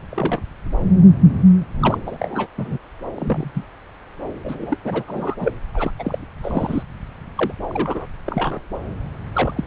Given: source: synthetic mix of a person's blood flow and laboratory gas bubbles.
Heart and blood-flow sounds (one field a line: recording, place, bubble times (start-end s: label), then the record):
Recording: Doppler ultrasound of blood flow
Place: subclavian vein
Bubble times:
0.11-0.42 s: bubbles
1.80-1.98 s: bubbles
2.06-2.47 s: bubbles
2.58-2.77 s: bubbles
3.15-3.51 s: bubbles
3.55-3.65 s: bubbles
4.44-4.77 s: bubbles
4.84-5.04 s: bubbles
5.07-5.35 s: bubbles
5.40-5.52 s: bubbles
5.74-5.91 s: bubbles
5.99-6.18 s: bubbles
6.43-6.83 s: bubbles
7.38-7.52 s: bubbles
7.69-8.07 s: bubbles
8.26-8.61 s: bubbles
9.33-9.64 s: bubbles
From the record:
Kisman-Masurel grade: 332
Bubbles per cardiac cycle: rolling drumbeat, 9 or more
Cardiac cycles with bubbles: 50 to 99%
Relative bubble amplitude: moderate (0.250 to 0.450)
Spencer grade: 3 (all of the cardiac periods contain showers or single bubble signals, but not dominating or overriding the cardiac motion signals)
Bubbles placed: anywhere in the cardiac cycle